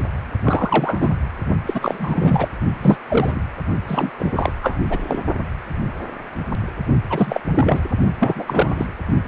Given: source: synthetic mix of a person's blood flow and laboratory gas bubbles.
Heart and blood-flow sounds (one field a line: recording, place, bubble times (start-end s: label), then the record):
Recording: Doppler ultrasound of blood flow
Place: precordium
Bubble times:
0.44-1.17 s: bubbles
1.66-2.48 s: bubbles
2.81-2.96 s: bubbles
3.08-3.41 s: bubbles
3.87-4.10 s: bubbles
4.18-4.52 s: bubbles
4.62-4.81 s: bubbles
4.89-5.20 s: bubbles
7.10-7.40 s: bubbles
7.54-7.80 s: bubbles
8.20-8.43 s: bubbles
8.46-8.86 s: bubbles
9.24-9.28 s: bubbles
From the record:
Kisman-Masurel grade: 333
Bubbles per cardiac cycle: rolling drumbeat, 9 or more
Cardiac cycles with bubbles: 50 to 99%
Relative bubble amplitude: loud (0.450 to 0.775)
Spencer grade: 3 (all of the cardiac periods contain showers or single bubble signals, but not dominating or overriding the cardiac motion signals)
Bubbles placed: only in the low amplitude regions of the cardiac cycle